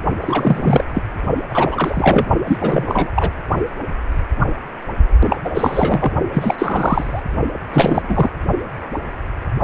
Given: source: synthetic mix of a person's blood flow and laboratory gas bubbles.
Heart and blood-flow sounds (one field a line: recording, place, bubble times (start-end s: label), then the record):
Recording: Doppler ultrasound of blood flow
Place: precordium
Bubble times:
0.21-0.84 s: bubbles
0.94-1.03 s: bubbles
1.49-2.26 s: bubbles
2.47-3.11 s: bubbles
3.15-3.31 s: bubbles
5.29-5.36 s: bubbles
5.45-5.51 s: bubbles
5.54-6.12 s: bubbles
6.33-7.22 s: bubbles
7.73-8.31 s: bubbles
From the record:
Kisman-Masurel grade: 333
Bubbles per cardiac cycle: rolling drumbeat, 9 or more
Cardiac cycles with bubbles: 50 to 99%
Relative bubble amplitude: loud (0.450 to 0.775)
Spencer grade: 3 (all of the cardiac periods contain showers or single bubble signals, but not dominating or overriding the cardiac motion signals)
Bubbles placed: only in the low amplitude regions of the cardiac cycle